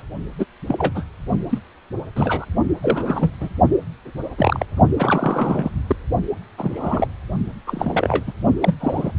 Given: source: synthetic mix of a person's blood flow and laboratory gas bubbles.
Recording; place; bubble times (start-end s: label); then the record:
Doppler ultrasound of blood flow; precordium
0.00-0.02 s: bubbles
0.38-0.46 s: bubbles
0.67-1.03 s: bubbles
1.49-1.59 s: bubbles
2.15-2.45 s: bubbles
2.82-3.31 s: bubbles
3.40-3.48 s: bubbles
4.38-4.66 s: bubbles
4.97-5.71 s: bubbles
5.87-5.96 s: bubbles
6.58-7.08 s: bubbles
7.67-8.24 s: bubbles
8.27-8.32 s: bubbles
8.60-8.74 s: bubbles
8.79-9.12 s: bubbles
From the record:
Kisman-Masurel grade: 232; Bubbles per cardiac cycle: several, 3 to 8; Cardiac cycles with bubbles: 50 to 99%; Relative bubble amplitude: moderate (0.250 to 0.450); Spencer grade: 3 (all of the cardiac periods contain showers or single bubble signals, but not dominating or overriding the cardiac motion signals); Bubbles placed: only in the low amplitude regions of the cardiac cycle